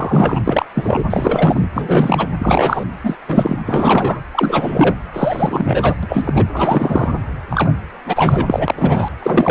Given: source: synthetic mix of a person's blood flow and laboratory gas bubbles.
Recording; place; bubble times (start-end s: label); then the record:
Doppler ultrasound of blood flow; precordium
0.00-0.41 s: bubbles
0.44-0.65 s: bubbles
0.74-1.03 s: bubbles
1.10-1.68 s: bubbles
1.75-2.28 s: bubbles
2.39-2.85 s: bubbles
3.03-3.16 s: bubbles
3.28-3.58 s: bubbles
3.66-4.21 s: bubbles
4.32-4.95 s: bubbles
5.13-5.95 s: bubbles
6.03-6.46 s: bubbles
6.52-7.12 s: bubbles
7.50-7.71 s: bubbles
8.05-9.08 s: bubbles
9.22-9.50 s: bubbles
From the record:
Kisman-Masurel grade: 333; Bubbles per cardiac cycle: rolling drumbeat, 9 or more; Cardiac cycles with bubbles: 50 to 99%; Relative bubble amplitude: loud (0.450 to 0.775); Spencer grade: 3 (all of the cardiac periods contain showers or single bubble signals, but not dominating or overriding the cardiac motion signals); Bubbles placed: anywhere in the cardiac cycle